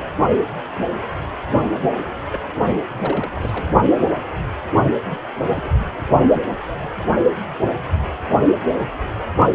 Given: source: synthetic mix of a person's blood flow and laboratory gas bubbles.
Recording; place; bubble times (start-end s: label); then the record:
Doppler ultrasound of blood flow; precordium
1.79-2.10 s: bubbles
2.31-2.39 s: bubbles
2.96-3.31 s: bubbles
3.35-3.68 s: bubbles
5.10-5.19 s: bubbles
5.46-5.76 s: bubbles
6.32-6.46 s: bubbles
6.59-6.91 s: bubbles
From the record:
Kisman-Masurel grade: 221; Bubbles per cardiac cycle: several, 3 to 8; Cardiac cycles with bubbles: 10 to 50%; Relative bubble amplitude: barely perceptible (0.100 to 0.250); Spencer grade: 2 (many but less than half of the cardiac periods contain bubble signals, singularly or in groups); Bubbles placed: only in the low amplitude regions of the cardiac cycle